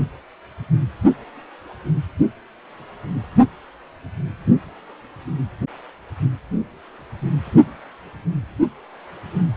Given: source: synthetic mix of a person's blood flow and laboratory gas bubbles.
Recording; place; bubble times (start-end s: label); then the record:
Doppler ultrasound of blood flow; precordium
no bubbles
From the record:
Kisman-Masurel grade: 000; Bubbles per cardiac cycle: 0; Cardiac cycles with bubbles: 0%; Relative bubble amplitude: no bubbles discernible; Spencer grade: 0 (complete lack of bubble signals)